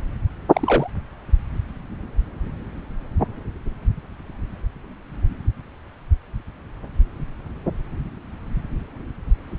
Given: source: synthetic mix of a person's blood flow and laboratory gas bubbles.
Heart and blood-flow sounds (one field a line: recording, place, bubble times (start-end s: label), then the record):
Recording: Doppler ultrasound of blood flow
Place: subclavian vein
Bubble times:
0.53-0.90 s: bubbles
From the record:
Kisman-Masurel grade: 112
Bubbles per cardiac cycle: 1 to 2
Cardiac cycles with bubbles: 1 to 10%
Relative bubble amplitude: moderate (0.250 to 0.450)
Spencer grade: 1 (occasional bubble signal discernible with the cardiac motion signal, with majority of cardiac periods free of bubbles)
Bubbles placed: anywhere in the cardiac cycle